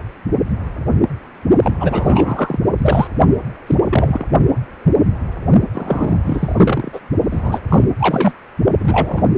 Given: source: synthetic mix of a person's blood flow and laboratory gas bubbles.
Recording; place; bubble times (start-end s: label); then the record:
Doppler ultrasound of blood flow; precordium
1.61-1.76 s: bubbles
1.80-2.59 s: bubbles
2.78-3.07 s: bubbles
3.67-3.75 s: bubbles
3.91-4.26 s: bubbles
5.71-6.19 s: bubbles
6.23-7.00 s: bubbles
7.31-7.61 s: bubbles
7.69-7.85 s: bubbles
7.99-8.34 s: bubbles
8.78-9.23 s: bubbles
From the record:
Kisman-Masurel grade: 333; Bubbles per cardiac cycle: rolling drumbeat, 9 or more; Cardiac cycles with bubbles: 50 to 99%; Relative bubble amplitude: loud (0.450 to 0.775); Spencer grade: 3 (all of the cardiac periods contain showers or single bubble signals, but not dominating or overriding the cardiac motion signals); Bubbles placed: only in the low amplitude regions of the cardiac cycle